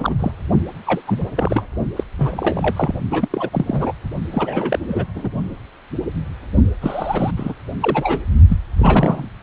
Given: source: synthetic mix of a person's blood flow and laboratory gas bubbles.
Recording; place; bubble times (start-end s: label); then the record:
Doppler ultrasound of blood flow; precordium
0.00-0.15 s: bubbles
0.19-0.32 s: bubbles
0.86-1.01 s: bubbles
1.07-1.30 s: bubbles
1.36-1.65 s: bubbles
1.96-2.04 s: bubbles
2.18-3.00 s: bubbles
3.10-3.50 s: bubbles
3.52-3.92 s: bubbles
4.31-4.79 s: bubbles
4.88-5.04 s: bubbles
5.15-5.29 s: bubbles
6.81-7.31 s: bubbles
7.37-7.54 s: bubbles
7.80-8.23 s: bubbles
8.49-8.57 s: bubbles
8.77-9.28 s: bubbles
From the record:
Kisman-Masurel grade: 332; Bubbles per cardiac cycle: rolling drumbeat, 9 or more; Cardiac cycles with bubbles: 50 to 99%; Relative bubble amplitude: moderate (0.250 to 0.450); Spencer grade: 3 (all of the cardiac periods contain showers or single bubble signals, but not dominating or overriding the cardiac motion signals); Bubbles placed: only in the low amplitude regions of the cardiac cycle